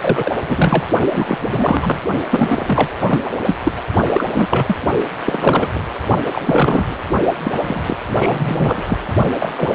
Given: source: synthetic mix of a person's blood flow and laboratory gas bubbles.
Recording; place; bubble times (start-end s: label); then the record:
Doppler ultrasound of blood flow; precordium
0.02-0.30 s: bubbles
0.47-0.84 s: bubbles
1.11-2.00 s: bubbles
2.30-2.88 s: bubbles
3.00-3.19 s: bubbles
3.23-3.36 s: bubbles
3.46-3.57 s: bubbles
3.63-3.72 s: bubbles
4.13-4.29 s: bubbles
4.33-4.78 s: bubbles
5.26-5.68 s: bubbles
5.75-5.80 s: bubbles
6.32-6.96 s: bubbles
7.44-7.58 s: bubbles
7.60-7.97 s: bubbles
8.07-8.83 s: bubbles
8.88-8.98 s: bubbles
9.40-9.52 s: bubbles
9.57-9.75 s: bubbles
From the record:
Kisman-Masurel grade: 343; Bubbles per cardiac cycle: rolling drumbeat, 9 or more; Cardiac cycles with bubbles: 100%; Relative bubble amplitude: loud (0.450 to 0.775); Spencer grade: 3 (all of the cardiac periods contain showers or single bubble signals, but not dominating or overriding the cardiac motion signals); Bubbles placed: only in the low amplitude regions of the cardiac cycle